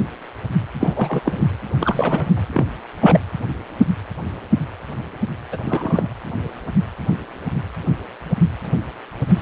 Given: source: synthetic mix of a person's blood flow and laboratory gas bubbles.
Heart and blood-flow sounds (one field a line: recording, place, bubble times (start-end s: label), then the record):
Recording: Doppler ultrasound of blood flow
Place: precordium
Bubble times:
0.80-1.21 s: bubbles
1.24-1.46 s: bubbles
1.76-2.46 s: bubbles
2.53-2.64 s: bubbles
3.00-3.21 s: bubbles
5.52-5.57 s: bubbles
5.65-6.08 s: bubbles
From the record:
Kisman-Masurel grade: 232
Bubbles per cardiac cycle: several, 3 to 8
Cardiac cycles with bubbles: 50 to 99%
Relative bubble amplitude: moderate (0.250 to 0.450)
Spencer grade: 3 (all of the cardiac periods contain showers or single bubble signals, but not dominating or overriding the cardiac motion signals)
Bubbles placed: anywhere in the cardiac cycle